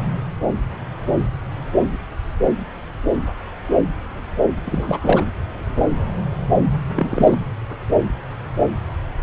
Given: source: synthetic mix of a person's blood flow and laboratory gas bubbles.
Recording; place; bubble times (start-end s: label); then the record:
Doppler ultrasound of blood flow; subclavian vein
4.64-4.98 s: bubbles
5.01-5.24 s: bubbles
6.94-7.38 s: bubbles
From the record:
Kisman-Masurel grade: 222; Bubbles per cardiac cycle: several, 3 to 8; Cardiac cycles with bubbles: 10 to 50%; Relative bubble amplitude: moderate (0.250 to 0.450); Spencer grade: 2 (many but less than half of the cardiac periods contain bubble signals, singularly or in groups); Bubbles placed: anywhere in the cardiac cycle